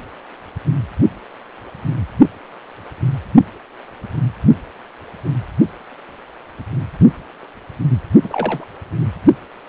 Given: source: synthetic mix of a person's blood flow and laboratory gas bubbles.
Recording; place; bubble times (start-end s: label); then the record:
Doppler ultrasound of blood flow; precordium
8.23-8.65 s: bubbles
9.01-9.05 s: bubbles
From the record:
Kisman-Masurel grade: 212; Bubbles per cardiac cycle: several, 3 to 8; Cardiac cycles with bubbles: 1 to 10%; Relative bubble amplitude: moderate (0.250 to 0.450); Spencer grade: 1 (occasional bubble signal discernible with the cardiac motion signal, with majority of cardiac periods free of bubbles); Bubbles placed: only in the low amplitude regions of the cardiac cycle